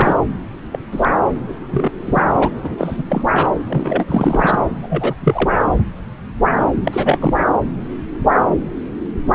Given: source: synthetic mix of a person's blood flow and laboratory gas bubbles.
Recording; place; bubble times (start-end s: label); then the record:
Doppler ultrasound of blood flow; subclavian vein
0.00-0.15 s: bubbles
0.72-0.79 s: bubbles
0.92-1.08 s: bubbles
1.48-1.54 s: bubbles
1.70-1.91 s: bubbles
2.04-2.21 s: bubbles
2.28-2.49 s: bubbles
2.63-3.03 s: bubbles
3.09-3.25 s: bubbles
3.34-3.46 s: bubbles
3.68-4.58 s: bubbles
4.82-5.14 s: bubbles
5.25-5.50 s: bubbles
5.58-5.66 s: bubbles
6.85-7.35 s: bubbles
From the record:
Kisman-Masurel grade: 332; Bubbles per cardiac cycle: rolling drumbeat, 9 or more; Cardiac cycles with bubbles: 50 to 99%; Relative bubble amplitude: moderate (0.250 to 0.450); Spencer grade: 3 (all of the cardiac periods contain showers or single bubble signals, but not dominating or overriding the cardiac motion signals); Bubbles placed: anywhere in the cardiac cycle